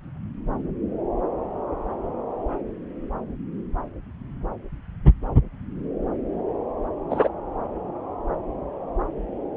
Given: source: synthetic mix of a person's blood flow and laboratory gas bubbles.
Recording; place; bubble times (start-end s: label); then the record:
Doppler ultrasound of blood flow; subclavian vein
7.10-7.28 s: bubbles
From the record:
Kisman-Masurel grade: 123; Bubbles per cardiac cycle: 1 to 2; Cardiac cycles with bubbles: 10 to 50%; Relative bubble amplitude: loud (0.450 to 0.775); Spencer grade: 2 (many but less than half of the cardiac periods contain bubble signals, singularly or in groups); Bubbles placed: anywhere in the cardiac cycle